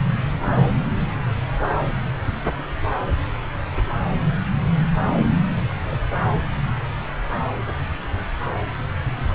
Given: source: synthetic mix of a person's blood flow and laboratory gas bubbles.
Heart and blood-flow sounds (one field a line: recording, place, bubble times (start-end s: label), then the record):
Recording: Doppler ultrasound of blood flow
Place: subclavian vein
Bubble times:
5.69-5.75 s: bubbles
5.89-5.97 s: bubbles
From the record:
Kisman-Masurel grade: 111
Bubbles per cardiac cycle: 1 to 2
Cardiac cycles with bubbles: 1 to 10%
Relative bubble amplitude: barely perceptible (0.100 to 0.250)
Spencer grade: 1 (occasional bubble signal discernible with the cardiac motion signal, with majority of cardiac periods free of bubbles)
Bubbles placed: anywhere in the cardiac cycle